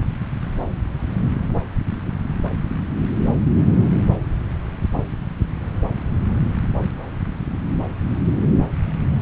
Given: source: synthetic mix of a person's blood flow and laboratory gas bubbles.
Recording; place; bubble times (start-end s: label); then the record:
Doppler ultrasound of blood flow; subclavian vein
no bubbles
From the record:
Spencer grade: 0 (complete lack of bubble signals)